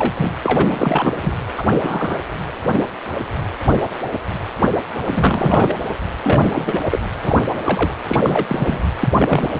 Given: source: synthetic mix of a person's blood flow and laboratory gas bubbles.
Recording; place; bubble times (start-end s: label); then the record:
Doppler ultrasound of blood flow; precordium
0.00-0.12 s: bubbles
0.16-0.32 s: bubbles
0.43-1.15 s: bubbles
1.20-1.33 s: bubbles
1.57-1.65 s: bubbles
1.83-2.27 s: bubbles
5.05-5.75 s: bubbles
6.24-6.83 s: bubbles
6.91-7.00 s: bubbles
7.23-7.35 s: bubbles
7.64-7.94 s: bubbles
8.07-8.21 s: bubbles
8.23-8.81 s: bubbles
8.99-9.08 s: bubbles
9.18-9.50 s: bubbles
From the record:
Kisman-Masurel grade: 232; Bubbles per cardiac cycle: several, 3 to 8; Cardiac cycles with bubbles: 50 to 99%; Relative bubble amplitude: moderate (0.250 to 0.450); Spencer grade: 3 (all of the cardiac periods contain showers or single bubble signals, but not dominating or overriding the cardiac motion signals); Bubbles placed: anywhere in the cardiac cycle